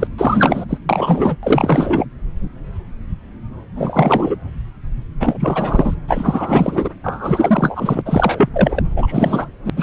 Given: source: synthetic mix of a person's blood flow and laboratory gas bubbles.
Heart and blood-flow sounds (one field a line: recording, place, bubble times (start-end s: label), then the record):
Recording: Doppler ultrasound of blood flow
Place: subclavian vein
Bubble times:
0.00-0.08 s: bubbles
0.17-0.65 s: bubbles
0.69-0.78 s: bubbles
0.89-1.36 s: bubbles
1.43-2.04 s: bubbles
3.75-4.36 s: bubbles
5.20-5.95 s: bubbles
6.08-6.89 s: bubbles
7.04-8.02 s: bubbles
8.05-8.49 s: bubbles
8.54-8.82 s: bubbles
8.96-9.49 s: bubbles
9.65-9.70 s: bubbles
9.77-9.83 s: bubbles
From the record:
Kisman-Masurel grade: 333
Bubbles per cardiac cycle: rolling drumbeat, 9 or more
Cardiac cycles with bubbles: 50 to 99%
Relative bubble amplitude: loud (0.450 to 0.775)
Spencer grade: 3 (all of the cardiac periods contain showers or single bubble signals, but not dominating or overriding the cardiac motion signals)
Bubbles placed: anywhere in the cardiac cycle